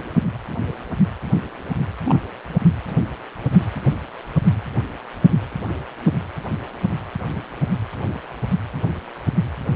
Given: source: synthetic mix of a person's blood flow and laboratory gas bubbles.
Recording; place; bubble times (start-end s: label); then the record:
Doppler ultrasound of blood flow; precordium
2.04-2.21 s: bubbles
From the record:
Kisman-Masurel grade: 112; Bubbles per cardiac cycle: 1 to 2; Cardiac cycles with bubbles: 1 to 10%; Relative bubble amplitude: moderate (0.250 to 0.450); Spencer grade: 1 (occasional bubble signal discernible with the cardiac motion signal, with majority of cardiac periods free of bubbles); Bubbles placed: anywhere in the cardiac cycle